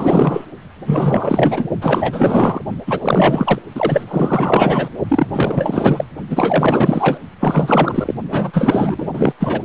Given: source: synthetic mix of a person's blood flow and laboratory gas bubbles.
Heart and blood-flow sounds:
Doppler ultrasound of blood flow; precordium
0.00-0.45 s: bubbles
0.86-1.67 s: bubbles
1.81-2.61 s: bubbles
2.87-2.99 s: bubbles
3.02-3.59 s: bubbles
3.75-4.89 s: bubbles
5.08-5.26 s: bubbles
5.33-6.04 s: bubbles
6.29-7.18 s: bubbles
7.41-8.14 s: bubbles
8.30-9.33 s: bubbles
9.39-9.63 s: bubbles
From the record:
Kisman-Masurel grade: 444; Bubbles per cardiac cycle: continuous sound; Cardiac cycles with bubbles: 100%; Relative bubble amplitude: maximal (0.775 to 0.999); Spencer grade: 4 (maximum detectable bubble signal sounding continuously throughout systole and diastole of every cardiac period, and overriding the amplitude of the normal cardiac signals); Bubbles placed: only in the low amplitude regions of the cardiac cycle

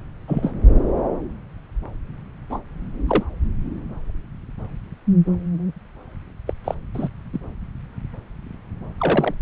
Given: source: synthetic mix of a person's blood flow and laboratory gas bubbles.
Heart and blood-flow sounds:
Doppler ultrasound of blood flow; subclavian vein
0.27-0.52 s: bubbles
2.50-2.59 s: bubbles
3.07-3.24 s: bubbles
6.47-6.53 s: bubbles
6.64-6.75 s: bubbles
6.94-7.08 s: bubbles
7.33-7.40 s: bubbles
8.98-9.34 s: bubbles
From the record:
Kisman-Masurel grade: 122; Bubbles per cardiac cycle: 1 to 2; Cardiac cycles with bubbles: 10 to 50%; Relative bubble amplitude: moderate (0.250 to 0.450); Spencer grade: 2 (many but less than half of the cardiac periods contain bubble signals, singularly or in groups); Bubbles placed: anywhere in the cardiac cycle

